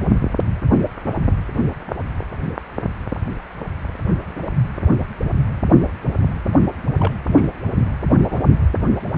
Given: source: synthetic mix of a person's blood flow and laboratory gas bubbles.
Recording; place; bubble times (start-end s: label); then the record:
Doppler ultrasound of blood flow; precordium
6.98-7.13 s: bubbles
7.29-7.47 s: bubbles
8.30-8.37 s: bubbles
From the record:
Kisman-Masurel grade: 211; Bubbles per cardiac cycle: several, 3 to 8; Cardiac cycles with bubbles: 1 to 10%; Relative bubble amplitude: barely perceptible (0.100 to 0.250); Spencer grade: 1 (occasional bubble signal discernible with the cardiac motion signal, with majority of cardiac periods free of bubbles); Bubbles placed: only in the low amplitude regions of the cardiac cycle